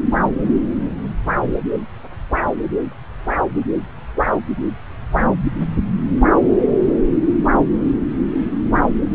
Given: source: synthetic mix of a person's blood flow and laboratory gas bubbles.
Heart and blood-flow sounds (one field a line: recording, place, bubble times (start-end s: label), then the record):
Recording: Doppler ultrasound of blood flow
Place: subclavian vein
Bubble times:
no bubbles
From the record:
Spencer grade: 0 (complete lack of bubble signals)